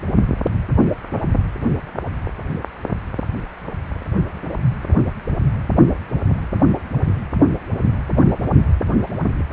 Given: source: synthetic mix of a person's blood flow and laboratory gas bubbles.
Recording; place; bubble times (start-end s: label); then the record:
Doppler ultrasound of blood flow; precordium
no bubbles
From the record:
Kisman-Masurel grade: 000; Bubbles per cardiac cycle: 0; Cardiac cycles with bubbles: 0%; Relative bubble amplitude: no bubbles discernible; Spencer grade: 0 (complete lack of bubble signals)